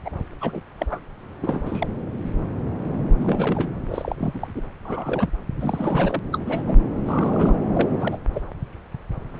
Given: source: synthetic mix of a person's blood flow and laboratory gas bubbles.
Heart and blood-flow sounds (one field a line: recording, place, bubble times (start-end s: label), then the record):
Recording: Doppler ultrasound of blood flow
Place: subclavian vein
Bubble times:
0.04-0.10 s: bubbles
0.41-0.61 s: bubbles
0.78-0.86 s: bubbles
0.89-1.00 s: bubbles
1.42-1.62 s: bubbles
1.65-1.89 s: bubbles
3.17-3.70 s: bubbles
3.88-4.65 s: bubbles
4.85-5.29 s: bubbles
5.55-6.20 s: bubbles
6.33-6.38 s: bubbles
6.46-6.62 s: bubbles
6.67-6.78 s: bubbles
7.05-7.57 s: bubbles
7.75-7.89 s: bubbles
7.99-8.18 s: bubbles
8.33-8.40 s: bubbles
From the record:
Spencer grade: 3 (all of the cardiac periods contain showers or single bubble signals, but not dominating or overriding the cardiac motion signals)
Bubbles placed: anywhere in the cardiac cycle